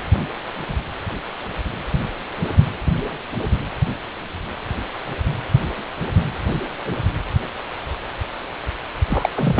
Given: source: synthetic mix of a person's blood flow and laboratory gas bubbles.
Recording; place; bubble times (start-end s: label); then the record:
Doppler ultrasound of blood flow; precordium
9.08-9.29 s: bubbles
9.36-9.60 s: bubbles
From the record:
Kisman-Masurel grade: 212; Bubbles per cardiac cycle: several, 3 to 8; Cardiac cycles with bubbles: 1 to 10%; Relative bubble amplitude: moderate (0.250 to 0.450); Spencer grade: 1 (occasional bubble signal discernible with the cardiac motion signal, with majority of cardiac periods free of bubbles); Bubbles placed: anywhere in the cardiac cycle